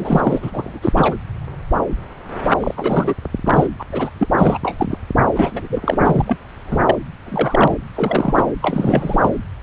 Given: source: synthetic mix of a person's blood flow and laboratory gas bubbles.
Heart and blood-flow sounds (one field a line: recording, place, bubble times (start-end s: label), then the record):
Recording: Doppler ultrasound of blood flow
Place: subclavian vein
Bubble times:
0.00-0.79 s: bubbles
0.82-0.92 s: bubbles
0.95-1.17 s: bubbles
2.60-3.14 s: bubbles
3.45-3.67 s: bubbles
3.79-3.84 s: bubbles
3.92-4.10 s: bubbles
4.19-4.27 s: bubbles
4.37-4.59 s: bubbles
4.62-4.97 s: bubbles
5.35-6.38 s: bubbles
6.67-6.80 s: bubbles
6.85-6.96 s: bubbles
7.26-7.75 s: bubbles
7.95-8.45 s: bubbles
8.62-9.30 s: bubbles
From the record:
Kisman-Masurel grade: 333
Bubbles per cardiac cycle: rolling drumbeat, 9 or more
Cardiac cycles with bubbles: 50 to 99%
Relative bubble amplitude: loud (0.450 to 0.775)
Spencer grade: 3 (all of the cardiac periods contain showers or single bubble signals, but not dominating or overriding the cardiac motion signals)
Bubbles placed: anywhere in the cardiac cycle